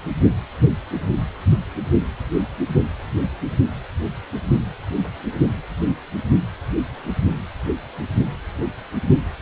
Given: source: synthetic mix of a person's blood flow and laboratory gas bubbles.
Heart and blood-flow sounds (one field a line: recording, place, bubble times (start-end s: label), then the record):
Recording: Doppler ultrasound of blood flow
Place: precordium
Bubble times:
no bubbles
From the record:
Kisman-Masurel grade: 000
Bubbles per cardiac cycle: 0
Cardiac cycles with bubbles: 0%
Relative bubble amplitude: no bubbles discernible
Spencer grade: 0 (complete lack of bubble signals)